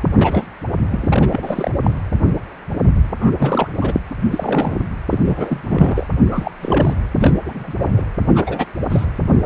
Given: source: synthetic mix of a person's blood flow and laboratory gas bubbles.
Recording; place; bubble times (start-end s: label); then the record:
Doppler ultrasound of blood flow; precordium
0.17-0.46 s: bubbles
0.91-1.71 s: bubbles
1.83-1.91 s: bubbles
3.21-3.31 s: bubbles
3.38-3.69 s: bubbles
3.77-3.94 s: bubbles
4.30-4.78 s: bubbles
5.09-6.08 s: bubbles
6.26-6.52 s: bubbles
6.61-6.94 s: bubbles
7.19-7.34 s: bubbles
7.46-7.74 s: bubbles
7.79-7.91 s: bubbles
7.96-8.04 s: bubbles
8.35-8.66 s: bubbles
8.90-9.05 s: bubbles
From the record:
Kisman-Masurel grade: 232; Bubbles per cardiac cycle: several, 3 to 8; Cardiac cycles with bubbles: 50 to 99%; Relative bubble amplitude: moderate (0.250 to 0.450); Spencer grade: 3 (all of the cardiac periods contain showers or single bubble signals, but not dominating or overriding the cardiac motion signals); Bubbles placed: anywhere in the cardiac cycle